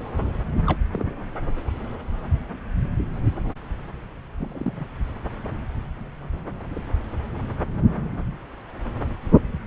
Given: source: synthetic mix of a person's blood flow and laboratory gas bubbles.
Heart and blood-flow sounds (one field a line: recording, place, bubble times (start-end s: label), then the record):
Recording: Doppler ultrasound of blood flow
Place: subclavian vein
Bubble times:
0.66-0.78 s: bubbles
0.92-1.15 s: bubbles
4.38-4.86 s: bubbles
6.75-6.94 s: bubbles
From the record:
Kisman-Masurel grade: 121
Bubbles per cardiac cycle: 1 to 2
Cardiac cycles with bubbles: 10 to 50%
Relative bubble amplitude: barely perceptible (0.100 to 0.250)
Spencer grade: 2 (many but less than half of the cardiac periods contain bubble signals, singularly or in groups)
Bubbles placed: anywhere in the cardiac cycle